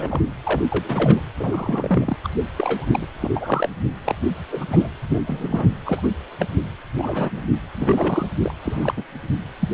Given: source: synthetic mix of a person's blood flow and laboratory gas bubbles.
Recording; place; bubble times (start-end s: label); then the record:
Doppler ultrasound of blood flow; precordium
0.00-0.32 s: bubbles
0.44-0.61 s: bubbles
0.72-1.21 s: bubbles
1.39-2.17 s: bubbles
2.23-2.29 s: bubbles
2.56-2.87 s: bubbles
2.93-3.06 s: bubbles
3.20-3.30 s: bubbles
3.35-3.70 s: bubbles
4.05-4.15 s: bubbles
4.51-4.64 s: bubbles
4.71-4.89 s: bubbles
5.09-5.21 s: bubbles
5.26-5.67 s: bubbles
5.86-6.09 s: bubbles
6.39-6.46 s: bubbles
6.97-7.42 s: bubbles
7.74-8.26 s: bubbles
8.39-8.54 s: bubbles
8.62-8.94 s: bubbles
8.96-9.04 s: bubbles
9.59-9.69 s: bubbles
From the record:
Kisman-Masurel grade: 242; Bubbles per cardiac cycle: several, 3 to 8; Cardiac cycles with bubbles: 100%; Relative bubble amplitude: moderate (0.250 to 0.450); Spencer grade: 3 (all of the cardiac periods contain showers or single bubble signals, but not dominating or overriding the cardiac motion signals); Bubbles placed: anywhere in the cardiac cycle